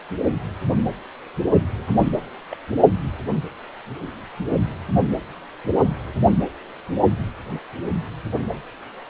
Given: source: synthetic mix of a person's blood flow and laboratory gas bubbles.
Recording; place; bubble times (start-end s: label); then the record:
Doppler ultrasound of blood flow; precordium
1.93-2.27 s: bubbles
2.50-2.56 s: bubbles
From the record:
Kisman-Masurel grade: 221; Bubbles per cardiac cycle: several, 3 to 8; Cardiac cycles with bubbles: 10 to 50%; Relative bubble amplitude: barely perceptible (0.100 to 0.250); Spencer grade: 2 (many but less than half of the cardiac periods contain bubble signals, singularly or in groups); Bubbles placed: anywhere in the cardiac cycle